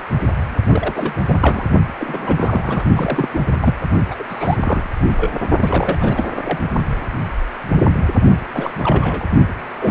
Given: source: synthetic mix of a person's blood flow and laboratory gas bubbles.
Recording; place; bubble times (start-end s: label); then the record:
Doppler ultrasound of blood flow; precordium
0.67-1.14 s: bubbles
1.27-1.38 s: bubbles
1.41-1.64 s: bubbles
1.98-2.85 s: bubbles
2.96-3.29 s: bubbles
3.33-3.40 s: bubbles
3.60-3.75 s: bubbles
4.10-4.15 s: bubbles
4.19-4.24 s: bubbles
4.29-4.57 s: bubbles
4.60-4.88 s: bubbles
5.00-5.14 s: bubbles
5.17-5.32 s: bubbles
5.59-5.97 s: bubbles
6.00-6.25 s: bubbles
6.35-6.59 s: bubbles
8.53-8.72 s: bubbles
8.80-9.25 s: bubbles
9.80-9.91 s: bubbles
From the record:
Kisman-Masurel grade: 332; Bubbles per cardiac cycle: rolling drumbeat, 9 or more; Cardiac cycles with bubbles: 50 to 99%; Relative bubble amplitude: moderate (0.250 to 0.450); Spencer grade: 3 (all of the cardiac periods contain showers or single bubble signals, but not dominating or overriding the cardiac motion signals); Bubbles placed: only in the low amplitude regions of the cardiac cycle